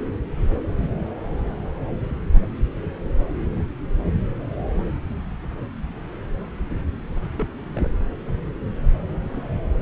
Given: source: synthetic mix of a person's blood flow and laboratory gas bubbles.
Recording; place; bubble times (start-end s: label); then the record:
Doppler ultrasound of blood flow; subclavian vein
2.83-2.87 s: bubbles
3.56-3.64 s: bubbles
7.38-7.47 s: bubbles
7.75-7.88 s: bubbles
9.27-9.48 s: bubbles
From the record:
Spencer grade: 2 (many but less than half of the cardiac periods contain bubble signals, singularly or in groups); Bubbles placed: anywhere in the cardiac cycle